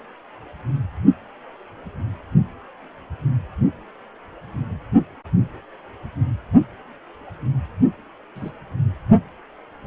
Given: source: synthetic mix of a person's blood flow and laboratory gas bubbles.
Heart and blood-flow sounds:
Doppler ultrasound of blood flow; precordium
8.36-8.51 s: bubbles
From the record:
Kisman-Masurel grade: 111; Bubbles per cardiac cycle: 1 to 2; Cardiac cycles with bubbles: 1 to 10%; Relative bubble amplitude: barely perceptible (0.100 to 0.250); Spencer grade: 1 (occasional bubble signal discernible with the cardiac motion signal, with majority of cardiac periods free of bubbles); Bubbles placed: anywhere in the cardiac cycle

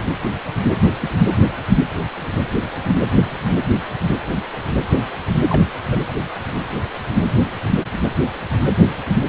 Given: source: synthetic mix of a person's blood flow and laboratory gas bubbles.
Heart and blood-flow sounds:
Doppler ultrasound of blood flow; precordium
1.00-1.08 s: bubbles
5.49-5.62 s: bubbles
5.89-6.00 s: bubbles
From the record:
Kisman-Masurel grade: 112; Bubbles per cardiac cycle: 1 to 2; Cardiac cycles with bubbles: 1 to 10%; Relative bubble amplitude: moderate (0.250 to 0.450); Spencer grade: 1 (occasional bubble signal discernible with the cardiac motion signal, with majority of cardiac periods free of bubbles); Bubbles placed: anywhere in the cardiac cycle

